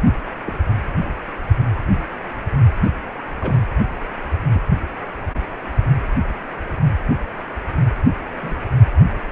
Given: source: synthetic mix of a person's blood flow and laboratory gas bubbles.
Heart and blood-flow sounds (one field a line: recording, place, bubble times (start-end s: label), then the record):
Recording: Doppler ultrasound of blood flow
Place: precordium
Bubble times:
0.46-0.57 s: bubbles
3.40-3.57 s: bubbles
4.54-4.61 s: bubbles
8.42-8.55 s: bubbles
From the record:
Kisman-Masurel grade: 121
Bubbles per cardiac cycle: 1 to 2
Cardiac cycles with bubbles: 10 to 50%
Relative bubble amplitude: barely perceptible (0.100 to 0.250)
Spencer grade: 2 (many but less than half of the cardiac periods contain bubble signals, singularly or in groups)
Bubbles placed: only in the low amplitude regions of the cardiac cycle